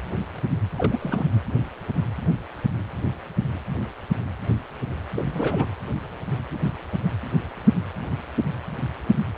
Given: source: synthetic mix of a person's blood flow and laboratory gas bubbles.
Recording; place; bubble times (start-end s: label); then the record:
Doppler ultrasound of blood flow; precordium
0.76-1.27 s: bubbles
5.16-5.69 s: bubbles
From the record:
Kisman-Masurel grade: 221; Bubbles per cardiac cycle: several, 3 to 8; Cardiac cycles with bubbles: 10 to 50%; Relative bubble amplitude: barely perceptible (0.100 to 0.250); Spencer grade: 2 (many but less than half of the cardiac periods contain bubble signals, singularly or in groups); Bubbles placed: anywhere in the cardiac cycle